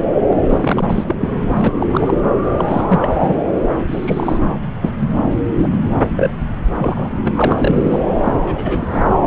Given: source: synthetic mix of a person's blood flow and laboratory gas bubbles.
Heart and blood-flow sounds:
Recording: Doppler ultrasound of blood flow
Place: subclavian vein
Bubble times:
0.30-0.38 s: bubbles
0.48-1.16 s: bubbles
1.21-1.29 s: bubbles
1.54-1.72 s: bubbles
1.80-1.86 s: bubbles
1.92-2.16 s: bubbles
2.56-2.65 s: bubbles
2.68-3.16 s: bubbles
3.19-3.33 s: bubbles
3.89-4.58 s: bubbles
4.82-4.93 s: bubbles
5.00-5.28 s: bubbles
5.57-5.67 s: bubbles
6.16-6.30 s: bubbles
6.78-7.08 s: bubbles
7.25-7.33 s: bubbles
7.36-7.98 s: bubbles
8.25-8.33 s: bubbles
8.41-8.90 s: bubbles
8.93-9.02 s: bubbles
From the record:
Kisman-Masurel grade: 242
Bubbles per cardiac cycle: several, 3 to 8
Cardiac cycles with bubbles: 100%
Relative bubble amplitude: moderate (0.250 to 0.450)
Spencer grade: 3 (all of the cardiac periods contain showers or single bubble signals, but not dominating or overriding the cardiac motion signals)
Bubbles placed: anywhere in the cardiac cycle

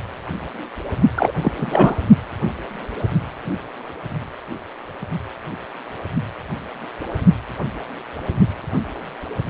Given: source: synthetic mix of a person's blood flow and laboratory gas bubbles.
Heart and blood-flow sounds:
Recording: Doppler ultrasound of blood flow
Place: precordium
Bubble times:
1.16-1.31 s: bubbles
1.38-1.51 s: bubbles
1.57-1.96 s: bubbles
From the record:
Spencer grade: 2 (many but less than half of the cardiac periods contain bubble signals, singularly or in groups)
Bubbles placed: only in the low amplitude regions of the cardiac cycle

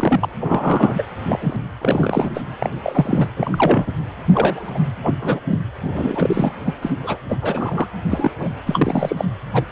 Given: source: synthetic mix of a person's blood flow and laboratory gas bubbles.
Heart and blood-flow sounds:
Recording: Doppler ultrasound of blood flow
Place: precordium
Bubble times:
0.00-0.29 s: bubbles
0.40-1.02 s: bubbles
1.23-1.56 s: bubbles
1.81-2.42 s: bubbles
2.59-2.70 s: bubbles
2.83-3.29 s: bubbles
3.36-3.92 s: bubbles
4.27-4.71 s: bubbles
4.75-4.79 s: bubbles
5.03-5.16 s: bubbles
5.21-5.40 s: bubbles
5.50-5.62 s: bubbles
5.82-6.51 s: bubbles
6.65-6.74 s: bubbles
6.82-6.93 s: bubbles
7.04-7.17 s: bubbles
7.29-7.36 s: bubbles
7.42-7.88 s: bubbles
8.11-8.31 s: bubbles
8.39-8.49 s: bubbles
8.66-9.25 s: bubbles
9.53-9.64 s: bubbles
From the record:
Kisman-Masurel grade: 242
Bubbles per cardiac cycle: several, 3 to 8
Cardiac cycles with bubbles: 100%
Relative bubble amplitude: moderate (0.250 to 0.450)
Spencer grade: 3 (all of the cardiac periods contain showers or single bubble signals, but not dominating or overriding the cardiac motion signals)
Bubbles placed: anywhere in the cardiac cycle

